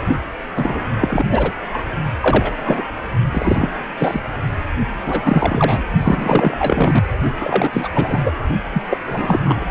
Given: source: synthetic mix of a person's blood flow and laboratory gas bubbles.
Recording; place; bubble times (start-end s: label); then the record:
Doppler ultrasound of blood flow; precordium
0.56-0.91 s: bubbles
0.99-1.25 s: bubbles
1.29-1.52 s: bubbles
1.73-1.78 s: bubbles
2.21-2.53 s: bubbles
2.64-2.82 s: bubbles
3.31-3.70 s: bubbles
3.98-4.21 s: bubbles
5.04-5.82 s: bubbles
6.00-7.04 s: bubbles
7.40-7.88 s: bubbles
7.93-8.21 s: bubbles
8.25-8.31 s: bubbles
8.72-8.82 s: bubbles
8.90-8.97 s: bubbles
9.06-9.39 s: bubbles
9.44-9.64 s: bubbles
From the record:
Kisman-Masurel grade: 333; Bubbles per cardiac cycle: rolling drumbeat, 9 or more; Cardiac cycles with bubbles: 50 to 99%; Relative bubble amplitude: loud (0.450 to 0.775); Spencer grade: 3 (all of the cardiac periods contain showers or single bubble signals, but not dominating or overriding the cardiac motion signals); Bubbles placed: only in the low amplitude regions of the cardiac cycle